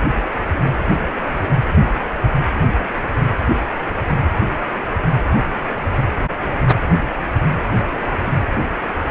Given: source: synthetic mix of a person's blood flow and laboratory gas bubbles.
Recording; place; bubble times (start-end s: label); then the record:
Doppler ultrasound of blood flow; precordium
no bubbles
From the record:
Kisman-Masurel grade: 000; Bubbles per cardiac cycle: 0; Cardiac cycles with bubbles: 0%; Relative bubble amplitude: no bubbles discernible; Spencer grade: 0 (complete lack of bubble signals)